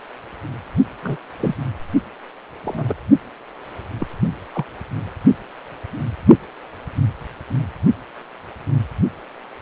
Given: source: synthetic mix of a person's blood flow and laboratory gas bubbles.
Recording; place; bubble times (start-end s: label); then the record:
Doppler ultrasound of blood flow; precordium
1.03-1.17 s: bubbles
1.40-1.55 s: bubbles
2.65-2.94 s: bubbles
4.00-4.07 s: bubbles
4.53-4.64 s: bubbles
From the record:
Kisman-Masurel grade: 122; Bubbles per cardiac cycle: 1 to 2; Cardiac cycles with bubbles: 10 to 50%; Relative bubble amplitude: moderate (0.250 to 0.450); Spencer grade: 2 (many but less than half of the cardiac periods contain bubble signals, singularly or in groups); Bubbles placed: only in the low amplitude regions of the cardiac cycle